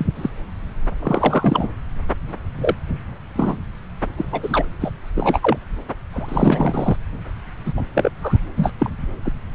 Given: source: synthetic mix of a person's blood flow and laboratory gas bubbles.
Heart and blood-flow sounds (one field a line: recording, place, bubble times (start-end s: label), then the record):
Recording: Doppler ultrasound of blood flow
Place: subclavian vein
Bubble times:
0.00-0.06 s: bubbles
0.16-0.30 s: bubbles
1.02-1.69 s: bubbles
2.60-2.75 s: bubbles
3.35-3.57 s: bubbles
4.17-4.25 s: bubbles
4.32-4.65 s: bubbles
4.80-4.91 s: bubbles
5.15-5.56 s: bubbles
6.12-6.96 s: bubbles
7.65-7.73 s: bubbles
7.76-7.82 s: bubbles
7.93-8.10 s: bubbles
8.21-8.39 s: bubbles
8.57-8.73 s: bubbles
8.79-8.90 s: bubbles
9.25-9.33 s: bubbles
From the record:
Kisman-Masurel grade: 243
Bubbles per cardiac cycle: several, 3 to 8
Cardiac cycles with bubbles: 100%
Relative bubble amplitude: loud (0.450 to 0.775)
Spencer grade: 3 (all of the cardiac periods contain showers or single bubble signals, but not dominating or overriding the cardiac motion signals)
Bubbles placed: anywhere in the cardiac cycle